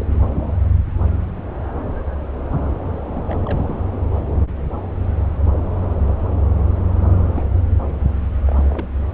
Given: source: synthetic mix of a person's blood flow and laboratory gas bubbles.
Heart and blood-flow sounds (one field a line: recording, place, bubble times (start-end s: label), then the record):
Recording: Doppler ultrasound of blood flow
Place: subclavian vein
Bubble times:
0.00-0.05 s: bubbles
2.89-3.34 s: bubbles
3.45-3.75 s: bubbles
7.34-7.43 s: bubbles
8.46-8.87 s: bubbles
From the record:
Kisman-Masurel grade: 221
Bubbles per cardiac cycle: several, 3 to 8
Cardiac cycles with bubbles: 10 to 50%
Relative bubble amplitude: barely perceptible (0.100 to 0.250)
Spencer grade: 2 (many but less than half of the cardiac periods contain bubble signals, singularly or in groups)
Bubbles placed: anywhere in the cardiac cycle